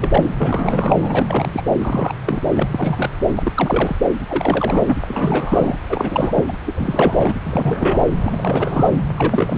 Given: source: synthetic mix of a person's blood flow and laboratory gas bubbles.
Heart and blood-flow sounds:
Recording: Doppler ultrasound of blood flow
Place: subclavian vein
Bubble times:
0.00-0.30 s: bubbles
0.39-1.50 s: bubbles
1.52-1.62 s: bubbles
1.79-2.14 s: bubbles
2.26-2.40 s: bubbles
2.54-3.10 s: bubbles
3.36-3.97 s: bubbles
4.27-4.97 s: bubbles
5.05-5.76 s: bubbles
5.89-6.44 s: bubbles
6.47-6.53 s: bubbles
6.66-7.33 s: bubbles
7.46-8.10 s: bubbles
8.23-9.00 s: bubbles
9.17-9.58 s: bubbles
From the record:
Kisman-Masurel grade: 342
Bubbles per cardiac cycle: rolling drumbeat, 9 or more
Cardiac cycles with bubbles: 100%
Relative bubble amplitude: moderate (0.250 to 0.450)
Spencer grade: 3 (all of the cardiac periods contain showers or single bubble signals, but not dominating or overriding the cardiac motion signals)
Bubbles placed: anywhere in the cardiac cycle

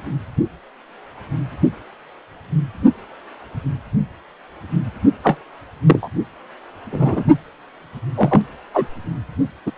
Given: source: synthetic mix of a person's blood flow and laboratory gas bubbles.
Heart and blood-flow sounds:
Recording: Doppler ultrasound of blood flow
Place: precordium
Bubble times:
5.23-5.38 s: bubbles
5.87-6.08 s: bubbles
6.92-7.25 s: bubbles
8.15-8.41 s: bubbles
8.73-8.86 s: bubbles
9.66-9.71 s: bubbles
From the record:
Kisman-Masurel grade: 123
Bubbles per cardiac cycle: 1 to 2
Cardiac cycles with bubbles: 10 to 50%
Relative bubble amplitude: loud (0.450 to 0.775)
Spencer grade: 2 (many but less than half of the cardiac periods contain bubble signals, singularly or in groups)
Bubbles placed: only in the low amplitude regions of the cardiac cycle

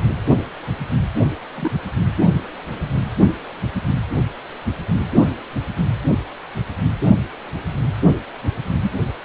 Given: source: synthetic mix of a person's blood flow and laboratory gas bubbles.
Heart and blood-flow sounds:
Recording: Doppler ultrasound of blood flow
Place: precordium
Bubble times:
1.55-1.71 s: bubbles
8.82-8.92 s: bubbles
From the record:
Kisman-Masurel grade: 121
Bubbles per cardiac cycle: 1 to 2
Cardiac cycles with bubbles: 10 to 50%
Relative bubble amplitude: barely perceptible (0.100 to 0.250)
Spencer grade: 2 (many but less than half of the cardiac periods contain bubble signals, singularly or in groups)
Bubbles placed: only in the low amplitude regions of the cardiac cycle

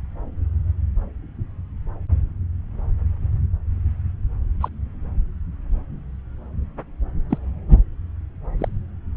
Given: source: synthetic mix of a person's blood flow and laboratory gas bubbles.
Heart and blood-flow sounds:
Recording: Doppler ultrasound of blood flow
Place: subclavian vein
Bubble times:
4.61-4.69 s: bubbles
7.30-7.38 s: bubbles
8.59-8.68 s: bubbles
From the record:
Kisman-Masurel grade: 122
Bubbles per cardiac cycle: 1 to 2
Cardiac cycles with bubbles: 10 to 50%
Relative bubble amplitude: moderate (0.250 to 0.450)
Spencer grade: 2 (many but less than half of the cardiac periods contain bubble signals, singularly or in groups)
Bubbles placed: anywhere in the cardiac cycle

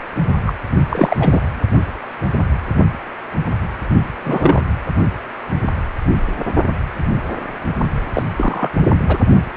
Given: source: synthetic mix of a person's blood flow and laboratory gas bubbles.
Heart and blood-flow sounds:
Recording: Doppler ultrasound of blood flow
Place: precordium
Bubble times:
0.46-0.54 s: bubbles
0.72-0.78 s: bubbles
0.89-1.16 s: bubbles
1.19-1.47 s: bubbles
4.25-4.62 s: bubbles
8.13-8.22 s: bubbles
8.37-8.69 s: bubbles
9.08-9.18 s: bubbles
From the record:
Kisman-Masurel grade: 223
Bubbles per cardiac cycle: several, 3 to 8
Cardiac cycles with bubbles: 10 to 50%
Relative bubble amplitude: loud (0.450 to 0.775)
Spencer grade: 2 (many but less than half of the cardiac periods contain bubble signals, singularly or in groups)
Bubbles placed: only in the low amplitude regions of the cardiac cycle

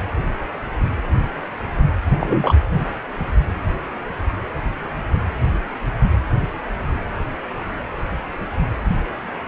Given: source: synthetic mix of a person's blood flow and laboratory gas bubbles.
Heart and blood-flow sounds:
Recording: Doppler ultrasound of blood flow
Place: precordium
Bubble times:
2.19-2.54 s: bubbles
From the record:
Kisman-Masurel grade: 113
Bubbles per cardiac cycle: 1 to 2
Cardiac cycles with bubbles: 1 to 10%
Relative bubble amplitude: loud (0.450 to 0.775)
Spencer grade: 1 (occasional bubble signal discernible with the cardiac motion signal, with majority of cardiac periods free of bubbles)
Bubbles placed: anywhere in the cardiac cycle

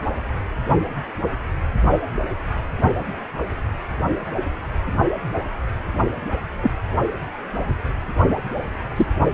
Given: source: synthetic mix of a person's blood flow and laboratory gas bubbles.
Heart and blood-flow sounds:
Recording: Doppler ultrasound of blood flow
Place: precordium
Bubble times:
6.62-6.71 s: bubbles
8.96-9.06 s: bubbles
From the record:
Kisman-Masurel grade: 123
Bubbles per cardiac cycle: 1 to 2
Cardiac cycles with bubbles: 10 to 50%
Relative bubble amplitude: loud (0.450 to 0.775)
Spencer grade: 2 (many but less than half of the cardiac periods contain bubble signals, singularly or in groups)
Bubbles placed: only in the low amplitude regions of the cardiac cycle

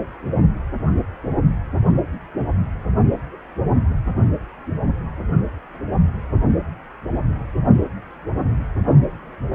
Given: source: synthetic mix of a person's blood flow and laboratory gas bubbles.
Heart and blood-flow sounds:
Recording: Doppler ultrasound of blood flow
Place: precordium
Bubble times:
no bubbles
From the record:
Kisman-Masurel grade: 000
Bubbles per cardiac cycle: 0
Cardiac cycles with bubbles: 0%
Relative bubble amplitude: no bubbles discernible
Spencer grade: 0 (complete lack of bubble signals)

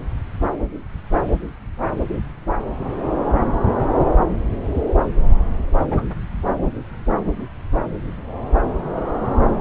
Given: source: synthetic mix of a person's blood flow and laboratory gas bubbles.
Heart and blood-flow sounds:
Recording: Doppler ultrasound of blood flow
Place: subclavian vein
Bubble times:
5.91-6.08 s: bubbles
From the record:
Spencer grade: 2 (many but less than half of the cardiac periods contain bubble signals, singularly or in groups)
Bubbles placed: anywhere in the cardiac cycle

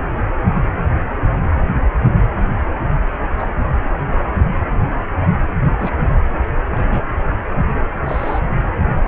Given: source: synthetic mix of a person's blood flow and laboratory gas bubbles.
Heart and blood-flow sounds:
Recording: Doppler ultrasound of blood flow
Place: precordium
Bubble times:
3.38-3.46 s: bubbles
5.77-5.98 s: bubbles
6.68-7.03 s: bubbles
8.05-8.40 s: bubbles
From the record:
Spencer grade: 2 (many but less than half of the cardiac periods contain bubble signals, singularly or in groups)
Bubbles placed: anywhere in the cardiac cycle

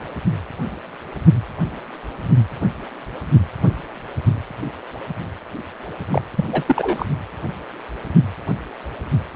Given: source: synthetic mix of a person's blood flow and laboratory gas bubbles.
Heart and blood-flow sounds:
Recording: Doppler ultrasound of blood flow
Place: precordium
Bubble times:
6.12-6.22 s: bubbles
6.36-6.45 s: bubbles
6.51-6.63 s: bubbles
6.66-7.05 s: bubbles
From the record:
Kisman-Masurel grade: 213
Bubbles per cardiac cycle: several, 3 to 8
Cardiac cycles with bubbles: 1 to 10%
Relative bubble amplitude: loud (0.450 to 0.775)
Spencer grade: 1 (occasional bubble signal discernible with the cardiac motion signal, with majority of cardiac periods free of bubbles)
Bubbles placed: anywhere in the cardiac cycle

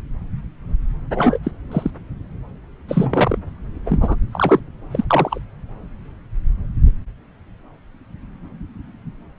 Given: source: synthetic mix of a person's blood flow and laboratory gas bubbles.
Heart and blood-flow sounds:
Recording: Doppler ultrasound of blood flow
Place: subclavian vein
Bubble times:
1.15-1.39 s: bubbles
1.43-1.52 s: bubbles
1.72-1.91 s: bubbles
2.88-3.38 s: bubbles
3.86-4.16 s: bubbles
4.32-4.60 s: bubbles
4.91-5.04 s: bubbles
5.10-5.39 s: bubbles
From the record:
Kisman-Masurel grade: 223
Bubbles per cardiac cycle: several, 3 to 8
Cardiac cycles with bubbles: 10 to 50%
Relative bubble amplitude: loud (0.450 to 0.775)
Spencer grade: 2 (many but less than half of the cardiac periods contain bubble signals, singularly or in groups)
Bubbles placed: anywhere in the cardiac cycle

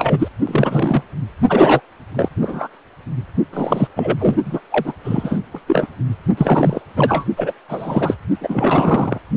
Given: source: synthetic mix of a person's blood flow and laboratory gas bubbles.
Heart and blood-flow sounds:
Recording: Doppler ultrasound of blood flow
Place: precordium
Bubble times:
0.00-0.28 s: bubbles
0.47-1.03 s: bubbles
1.49-1.80 s: bubbles
2.14-2.29 s: bubbles
2.42-2.67 s: bubbles
3.53-3.88 s: bubbles
3.96-4.37 s: bubbles
4.45-4.60 s: bubbles
4.70-4.94 s: bubbles
5.04-5.41 s: bubbles
5.54-5.59 s: bubbles
5.67-5.87 s: bubbles
6.37-6.82 s: bubbles
6.96-7.25 s: bubbles
7.36-7.53 s: bubbles
7.68-8.15 s: bubbles
8.41-9.19 s: bubbles
From the record:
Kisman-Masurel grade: 343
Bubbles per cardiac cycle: rolling drumbeat, 9 or more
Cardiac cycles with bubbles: 100%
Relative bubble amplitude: loud (0.450 to 0.775)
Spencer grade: 3 (all of the cardiac periods contain showers or single bubble signals, but not dominating or overriding the cardiac motion signals)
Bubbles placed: only in the low amplitude regions of the cardiac cycle

